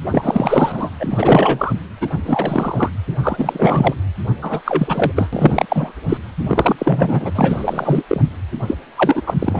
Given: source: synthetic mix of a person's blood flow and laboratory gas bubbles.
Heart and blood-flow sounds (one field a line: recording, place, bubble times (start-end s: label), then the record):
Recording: Doppler ultrasound of blood flow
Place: precordium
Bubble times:
0.06-0.90 s: bubbles
0.99-1.73 s: bubbles
2.00-2.08 s: bubbles
2.25-2.90 s: bubbles
3.20-3.94 s: bubbles
4.42-4.61 s: bubbles
4.65-5.12 s: bubbles
5.16-5.29 s: bubbles
5.33-5.66 s: bubbles
5.69-5.93 s: bubbles
6.08-6.17 s: bubbles
6.38-7.31 s: bubbles
7.35-8.03 s: bubbles
8.09-8.21 s: bubbles
8.67-8.75 s: bubbles
8.97-9.23 s: bubbles
9.26-9.34 s: bubbles
9.40-9.60 s: bubbles
From the record:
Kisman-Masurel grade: 343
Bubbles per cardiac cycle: rolling drumbeat, 9 or more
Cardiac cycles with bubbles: 100%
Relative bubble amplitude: loud (0.450 to 0.775)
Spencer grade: 3 (all of the cardiac periods contain showers or single bubble signals, but not dominating or overriding the cardiac motion signals)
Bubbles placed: anywhere in the cardiac cycle